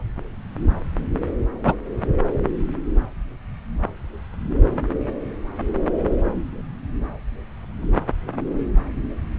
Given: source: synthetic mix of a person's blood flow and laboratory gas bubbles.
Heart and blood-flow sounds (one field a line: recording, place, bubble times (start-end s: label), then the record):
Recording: Doppler ultrasound of blood flow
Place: subclavian vein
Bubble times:
1.63-1.76 s: bubbles
From the record:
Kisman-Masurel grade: 113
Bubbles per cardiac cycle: 1 to 2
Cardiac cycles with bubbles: 1 to 10%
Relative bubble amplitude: loud (0.450 to 0.775)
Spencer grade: 1 (occasional bubble signal discernible with the cardiac motion signal, with majority of cardiac periods free of bubbles)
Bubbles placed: anywhere in the cardiac cycle